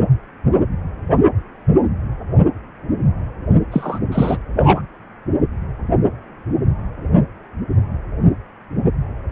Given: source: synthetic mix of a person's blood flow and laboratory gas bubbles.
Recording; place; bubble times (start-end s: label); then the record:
Doppler ultrasound of blood flow; precordium
3.71-4.00 s: bubbles
4.12-4.37 s: bubbles
4.55-4.82 s: bubbles
From the record:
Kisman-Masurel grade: 213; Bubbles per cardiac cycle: several, 3 to 8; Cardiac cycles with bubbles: 1 to 10%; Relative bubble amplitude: loud (0.450 to 0.775); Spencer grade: 1 (occasional bubble signal discernible with the cardiac motion signal, with majority of cardiac periods free of bubbles); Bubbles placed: only in the low amplitude regions of the cardiac cycle